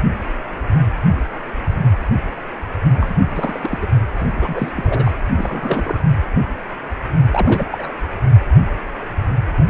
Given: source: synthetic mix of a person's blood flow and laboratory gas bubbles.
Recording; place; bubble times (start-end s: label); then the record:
Doppler ultrasound of blood flow; precordium
2.97-3.15 s: bubbles
3.21-3.78 s: bubbles
3.81-3.86 s: bubbles
4.20-4.25 s: bubbles
4.42-4.72 s: bubbles
4.76-5.14 s: bubbles
5.35-5.99 s: bubbles
7.31-7.92 s: bubbles
9.56-9.70 s: bubbles
From the record:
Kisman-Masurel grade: 332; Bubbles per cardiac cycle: rolling drumbeat, 9 or more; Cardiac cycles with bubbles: 50 to 99%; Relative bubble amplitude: moderate (0.250 to 0.450); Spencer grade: 3 (all of the cardiac periods contain showers or single bubble signals, but not dominating or overriding the cardiac motion signals); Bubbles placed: anywhere in the cardiac cycle